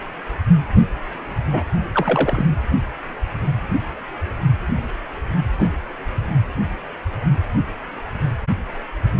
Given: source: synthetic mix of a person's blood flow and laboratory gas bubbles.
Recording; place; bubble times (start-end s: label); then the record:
Doppler ultrasound of blood flow; precordium
1.49-1.63 s: bubbles
1.92-2.46 s: bubbles
5.58-5.68 s: bubbles
From the record:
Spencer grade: 2 (many but less than half of the cardiac periods contain bubble signals, singularly or in groups); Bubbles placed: anywhere in the cardiac cycle